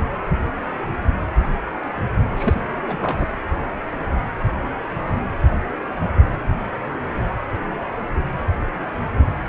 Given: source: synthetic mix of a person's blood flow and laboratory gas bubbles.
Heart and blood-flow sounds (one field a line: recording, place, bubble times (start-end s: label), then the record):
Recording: Doppler ultrasound of blood flow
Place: precordium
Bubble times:
2.35-2.60 s: bubbles
2.85-3.26 s: bubbles
From the record:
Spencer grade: 2 (many but less than half of the cardiac periods contain bubble signals, singularly or in groups)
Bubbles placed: anywhere in the cardiac cycle